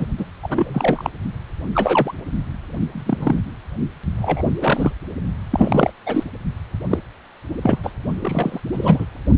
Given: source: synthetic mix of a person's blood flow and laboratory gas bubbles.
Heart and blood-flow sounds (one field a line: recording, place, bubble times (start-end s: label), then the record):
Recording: Doppler ultrasound of blood flow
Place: precordium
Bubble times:
0.00-0.08 s: bubbles
0.17-0.26 s: bubbles
0.42-1.10 s: bubbles
1.74-2.13 s: bubbles
2.92-3.41 s: bubbles
4.22-4.44 s: bubbles
4.61-4.92 s: bubbles
5.50-5.92 s: bubbles
6.06-6.24 s: bubbles
6.90-6.99 s: bubbles
7.62-7.78 s: bubbles
7.83-7.91 s: bubbles
8.21-8.60 s: bubbles
8.72-9.05 s: bubbles
From the record:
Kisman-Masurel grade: 242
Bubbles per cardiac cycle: several, 3 to 8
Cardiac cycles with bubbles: 100%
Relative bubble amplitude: moderate (0.250 to 0.450)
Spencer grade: 3 (all of the cardiac periods contain showers or single bubble signals, but not dominating or overriding the cardiac motion signals)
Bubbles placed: only in the low amplitude regions of the cardiac cycle